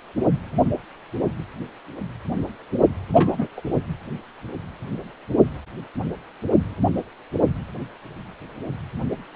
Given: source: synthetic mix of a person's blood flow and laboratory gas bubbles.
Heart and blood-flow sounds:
Doppler ultrasound of blood flow; precordium
3.12-3.47 s: bubbles
3.56-3.61 s: bubbles
From the record:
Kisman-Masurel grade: 212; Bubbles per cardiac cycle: several, 3 to 8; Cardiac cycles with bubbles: 1 to 10%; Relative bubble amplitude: moderate (0.250 to 0.450); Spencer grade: 1 (occasional bubble signal discernible with the cardiac motion signal, with majority of cardiac periods free of bubbles); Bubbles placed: only in the low amplitude regions of the cardiac cycle

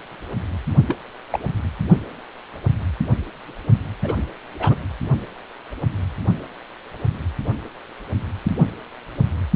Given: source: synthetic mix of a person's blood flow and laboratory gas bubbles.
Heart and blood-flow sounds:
Doppler ultrasound of blood flow; precordium
0.87-0.96 s: bubbles
1.31-1.39 s: bubbles
4.03-4.15 s: bubbles
4.59-4.76 s: bubbles
From the record:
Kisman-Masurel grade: 122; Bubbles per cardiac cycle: 1 to 2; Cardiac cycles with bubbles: 10 to 50%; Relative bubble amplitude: moderate (0.250 to 0.450); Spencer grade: 2 (many but less than half of the cardiac periods contain bubble signals, singularly or in groups); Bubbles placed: only in the low amplitude regions of the cardiac cycle

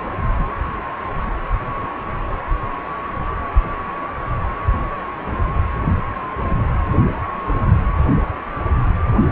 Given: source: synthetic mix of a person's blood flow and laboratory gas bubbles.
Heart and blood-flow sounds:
Doppler ultrasound of blood flow; precordium
no bubbles
From the record:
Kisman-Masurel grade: 000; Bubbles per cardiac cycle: 0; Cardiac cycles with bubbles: 0%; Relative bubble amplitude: no bubbles discernible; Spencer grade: 0 (complete lack of bubble signals)

